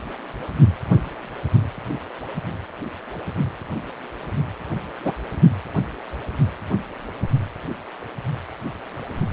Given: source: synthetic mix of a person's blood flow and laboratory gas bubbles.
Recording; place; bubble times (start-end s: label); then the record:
Doppler ultrasound of blood flow; precordium
5.04-5.13 s: bubbles
From the record:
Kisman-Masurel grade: 123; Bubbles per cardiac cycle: 1 to 2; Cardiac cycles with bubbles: 10 to 50%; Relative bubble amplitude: loud (0.450 to 0.775); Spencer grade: 2 (many but less than half of the cardiac periods contain bubble signals, singularly or in groups); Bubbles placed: only in the low amplitude regions of the cardiac cycle